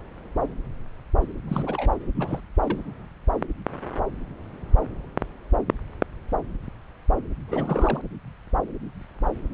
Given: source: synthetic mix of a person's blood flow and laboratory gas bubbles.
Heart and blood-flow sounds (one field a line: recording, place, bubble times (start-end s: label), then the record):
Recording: Doppler ultrasound of blood flow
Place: subclavian vein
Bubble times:
1.47-1.90 s: bubbles
2.16-2.40 s: bubbles
2.60-2.79 s: bubbles
7.47-8.02 s: bubbles
From the record:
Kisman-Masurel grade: 221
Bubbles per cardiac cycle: several, 3 to 8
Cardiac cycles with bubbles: 10 to 50%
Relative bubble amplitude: barely perceptible (0.100 to 0.250)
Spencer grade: 2 (many but less than half of the cardiac periods contain bubble signals, singularly or in groups)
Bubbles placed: anywhere in the cardiac cycle